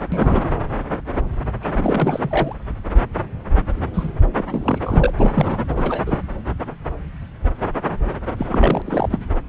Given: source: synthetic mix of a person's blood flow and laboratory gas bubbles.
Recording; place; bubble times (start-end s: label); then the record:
Doppler ultrasound of blood flow; subclavian vein
0.12-0.48 s: bubbles
1.61-2.56 s: bubbles
3.94-4.12 s: bubbles
4.38-4.44 s: bubbles
4.50-5.12 s: bubbles
5.19-5.58 s: bubbles
5.69-5.73 s: bubbles
5.76-6.03 s: bubbles
6.06-6.22 s: bubbles
8.38-8.82 s: bubbles
8.86-9.20 s: bubbles
From the record:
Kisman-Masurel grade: 332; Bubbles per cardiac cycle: rolling drumbeat, 9 or more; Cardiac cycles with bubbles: 50 to 99%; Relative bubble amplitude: moderate (0.250 to 0.450); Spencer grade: 3 (all of the cardiac periods contain showers or single bubble signals, but not dominating or overriding the cardiac motion signals); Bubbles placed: anywhere in the cardiac cycle